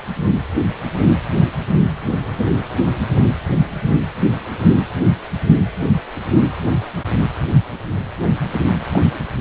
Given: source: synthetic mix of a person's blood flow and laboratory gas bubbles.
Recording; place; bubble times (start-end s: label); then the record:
Doppler ultrasound of blood flow; precordium
8.93-9.02 s: bubbles
9.13-9.22 s: bubbles
From the record:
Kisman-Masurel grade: 111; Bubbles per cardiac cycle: 1 to 2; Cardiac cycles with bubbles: 1 to 10%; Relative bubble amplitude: barely perceptible (0.100 to 0.250); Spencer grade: 1 (occasional bubble signal discernible with the cardiac motion signal, with majority of cardiac periods free of bubbles); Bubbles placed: anywhere in the cardiac cycle